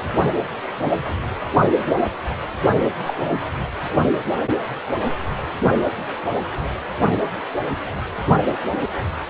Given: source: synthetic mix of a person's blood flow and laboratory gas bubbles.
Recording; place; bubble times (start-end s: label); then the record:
Doppler ultrasound of blood flow; precordium
3.06-3.14 s: bubbles
From the record:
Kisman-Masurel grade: 122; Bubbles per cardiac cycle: 1 to 2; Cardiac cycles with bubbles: 10 to 50%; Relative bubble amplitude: moderate (0.250 to 0.450); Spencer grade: 2 (many but less than half of the cardiac periods contain bubble signals, singularly or in groups); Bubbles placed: only in the low amplitude regions of the cardiac cycle